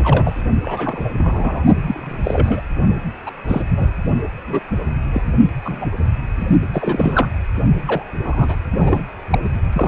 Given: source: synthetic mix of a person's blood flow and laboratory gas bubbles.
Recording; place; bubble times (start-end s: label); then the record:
Doppler ultrasound of blood flow; precordium
0.00-0.42 s: bubbles
0.62-1.09 s: bubbles
1.18-1.63 s: bubbles
1.86-2.18 s: bubbles
2.24-2.62 s: bubbles
3.26-3.31 s: bubbles
3.47-3.62 s: bubbles
3.76-3.91 s: bubbles
4.46-4.60 s: bubbles
5.12-5.22 s: bubbles
5.25-5.33 s: bubbles
5.64-5.94 s: bubbles
6.40-6.46 s: bubbles
6.72-7.29 s: bubbles
7.85-8.03 s: bubbles
8.25-8.56 s: bubbles
8.78-9.03 s: bubbles
9.30-9.38 s: bubbles
9.73-9.88 s: bubbles
From the record:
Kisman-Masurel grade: 232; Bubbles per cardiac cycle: several, 3 to 8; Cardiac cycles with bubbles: 50 to 99%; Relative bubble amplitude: moderate (0.250 to 0.450); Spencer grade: 3 (all of the cardiac periods contain showers or single bubble signals, but not dominating or overriding the cardiac motion signals); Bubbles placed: only in the low amplitude regions of the cardiac cycle